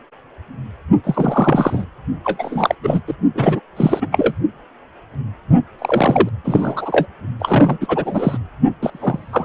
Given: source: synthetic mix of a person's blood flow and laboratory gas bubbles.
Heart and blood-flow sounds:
Doppler ultrasound of blood flow; precordium
1.04-1.85 s: bubbles
2.24-2.75 s: bubbles
2.83-3.01 s: bubbles
3.07-3.14 s: bubbles
3.34-3.60 s: bubbles
3.76-4.07 s: bubbles
4.11-4.35 s: bubbles
5.79-6.29 s: bubbles
6.44-7.07 s: bubbles
7.40-7.78 s: bubbles
7.81-8.38 s: bubbles
8.81-9.45 s: bubbles
From the record:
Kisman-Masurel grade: 333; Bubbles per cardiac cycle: rolling drumbeat, 9 or more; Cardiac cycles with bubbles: 50 to 99%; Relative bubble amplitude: loud (0.450 to 0.775); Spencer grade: 3 (all of the cardiac periods contain showers or single bubble signals, but not dominating or overriding the cardiac motion signals); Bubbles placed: only in the low amplitude regions of the cardiac cycle

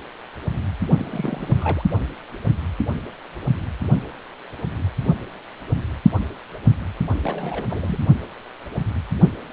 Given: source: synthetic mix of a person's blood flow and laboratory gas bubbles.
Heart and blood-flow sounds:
Doppler ultrasound of blood flow; precordium
0.97-1.83 s: bubbles
7.22-7.63 s: bubbles
7.69-8.00 s: bubbles
From the record:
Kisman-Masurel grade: 221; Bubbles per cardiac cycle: several, 3 to 8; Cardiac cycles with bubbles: 10 to 50%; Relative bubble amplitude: barely perceptible (0.100 to 0.250); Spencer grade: 2 (many but less than half of the cardiac periods contain bubble signals, singularly or in groups); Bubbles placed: only in the low amplitude regions of the cardiac cycle

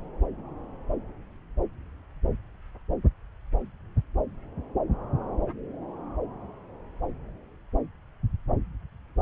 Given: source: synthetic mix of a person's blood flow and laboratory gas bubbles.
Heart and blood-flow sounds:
Doppler ultrasound of blood flow; subclavian vein
no bubbles
From the record:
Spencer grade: 0 (complete lack of bubble signals)

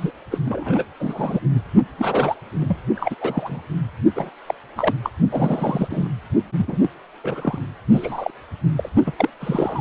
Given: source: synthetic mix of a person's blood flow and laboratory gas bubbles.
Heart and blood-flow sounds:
Doppler ultrasound of blood flow; precordium
0.00-0.11 s: bubbles
0.31-0.39 s: bubbles
0.45-0.84 s: bubbles
0.99-1.40 s: bubbles
1.97-2.35 s: bubbles
2.61-2.80 s: bubbles
2.95-3.16 s: bubbles
3.21-3.62 s: bubbles
4.15-4.30 s: bubbles
4.46-4.54 s: bubbles
4.77-4.94 s: bubbles
5.02-5.09 s: bubbles
5.31-6.08 s: bubbles
6.57-6.79 s: bubbles
6.81-6.89 s: bubbles
7.23-7.58 s: bubbles
7.91-8.31 s: bubbles
8.76-8.89 s: bubbles
9.06-9.12 s: bubbles
9.18-9.29 s: bubbles
9.40-9.81 s: bubbles
From the record:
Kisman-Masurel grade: 242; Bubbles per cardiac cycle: several, 3 to 8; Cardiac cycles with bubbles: 100%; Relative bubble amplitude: moderate (0.250 to 0.450); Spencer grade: 3 (all of the cardiac periods contain showers or single bubble signals, but not dominating or overriding the cardiac motion signals); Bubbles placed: only in the low amplitude regions of the cardiac cycle

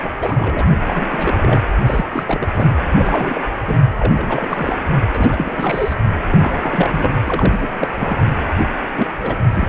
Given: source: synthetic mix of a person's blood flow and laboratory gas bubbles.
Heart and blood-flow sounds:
Doppler ultrasound of blood flow; precordium
0.02-0.10 s: bubbles
0.17-0.69 s: bubbles
0.84-1.07 s: bubbles
1.11-1.62 s: bubbles
1.86-2.05 s: bubbles
2.08-2.24 s: bubbles
2.27-2.71 s: bubbles
2.98-3.40 s: bubbles
3.65-3.81 s: bubbles
4.00-4.80 s: bubbles
5.13-5.94 s: bubbles
6.29-7.14 s: bubbles
7.25-7.96 s: bubbles
7.99-8.17 s: bubbles
8.96-9.07 s: bubbles
9.21-9.35 s: bubbles
9.54-9.69 s: bubbles
From the record:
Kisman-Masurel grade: 342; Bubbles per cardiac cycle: rolling drumbeat, 9 or more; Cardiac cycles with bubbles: 100%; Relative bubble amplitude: moderate (0.250 to 0.450); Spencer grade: 3 (all of the cardiac periods contain showers or single bubble signals, but not dominating or overriding the cardiac motion signals); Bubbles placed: anywhere in the cardiac cycle

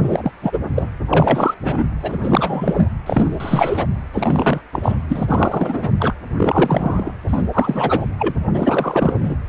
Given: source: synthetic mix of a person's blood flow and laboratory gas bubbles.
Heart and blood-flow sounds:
Doppler ultrasound of blood flow; precordium
0.03-0.32 s: bubbles
0.42-0.59 s: bubbles
0.73-0.94 s: bubbles
1.09-1.55 s: bubbles
1.64-1.84 s: bubbles
2.02-2.89 s: bubbles
3.06-3.87 s: bubbles
4.12-4.61 s: bubbles
4.73-4.98 s: bubbles
5.08-5.92 s: bubbles
6.00-6.14 s: bubbles
6.37-7.12 s: bubbles
7.28-7.42 s: bubbles
7.53-8.06 s: bubbles
8.18-8.34 s: bubbles
8.54-9.35 s: bubbles
From the record:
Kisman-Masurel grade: 343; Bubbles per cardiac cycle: rolling drumbeat, 9 or more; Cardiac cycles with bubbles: 100%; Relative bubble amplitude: loud (0.450 to 0.775); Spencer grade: 3 (all of the cardiac periods contain showers or single bubble signals, but not dominating or overriding the cardiac motion signals); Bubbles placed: anywhere in the cardiac cycle

